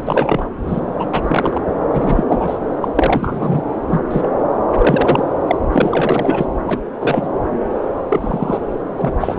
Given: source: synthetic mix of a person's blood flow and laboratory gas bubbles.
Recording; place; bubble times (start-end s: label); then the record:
Doppler ultrasound of blood flow; subclavian vein
0.05-0.48 s: bubbles
0.67-0.80 s: bubbles
0.99-1.08 s: bubbles
1.14-1.61 s: bubbles
1.93-2.24 s: bubbles
2.28-2.58 s: bubbles
2.82-2.89 s: bubbles
2.95-3.62 s: bubbles
3.87-4.02 s: bubbles
4.11-4.29 s: bubbles
4.77-5.24 s: bubbles
5.47-5.56 s: bubbles
5.72-6.45 s: bubbles
6.66-6.79 s: bubbles
7.00-7.31 s: bubbles
8.08-8.58 s: bubbles
8.96-9.12 s: bubbles
9.19-9.39 s: bubbles
From the record:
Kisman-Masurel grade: 243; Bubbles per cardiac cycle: several, 3 to 8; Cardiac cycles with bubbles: 100%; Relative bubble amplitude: loud (0.450 to 0.775); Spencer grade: 3 (all of the cardiac periods contain showers or single bubble signals, but not dominating or overriding the cardiac motion signals); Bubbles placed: anywhere in the cardiac cycle